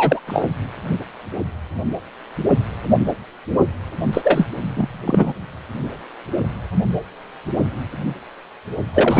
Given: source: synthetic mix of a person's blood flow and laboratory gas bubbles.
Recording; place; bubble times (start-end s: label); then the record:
Doppler ultrasound of blood flow; precordium
0.00-0.20 s: bubbles
0.27-0.45 s: bubbles
4.12-4.21 s: bubbles
4.24-4.47 s: bubbles
4.62-5.03 s: bubbles
5.06-5.33 s: bubbles
8.93-9.20 s: bubbles
From the record:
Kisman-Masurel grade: 223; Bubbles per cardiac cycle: several, 3 to 8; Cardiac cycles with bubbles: 10 to 50%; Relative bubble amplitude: loud (0.450 to 0.775); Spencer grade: 2 (many but less than half of the cardiac periods contain bubble signals, singularly or in groups); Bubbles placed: only in the low amplitude regions of the cardiac cycle